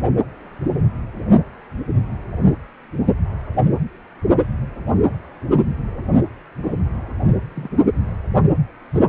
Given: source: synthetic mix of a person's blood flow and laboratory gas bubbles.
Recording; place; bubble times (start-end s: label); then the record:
Doppler ultrasound of blood flow; precordium
6.62-6.78 s: bubbles
7.28-7.34 s: bubbles
7.54-7.71 s: bubbles
From the record:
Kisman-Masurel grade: 211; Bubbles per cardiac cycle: several, 3 to 8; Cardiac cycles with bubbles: 1 to 10%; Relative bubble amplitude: barely perceptible (0.100 to 0.250); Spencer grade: 1 (occasional bubble signal discernible with the cardiac motion signal, with majority of cardiac periods free of bubbles); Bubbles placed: only in the low amplitude regions of the cardiac cycle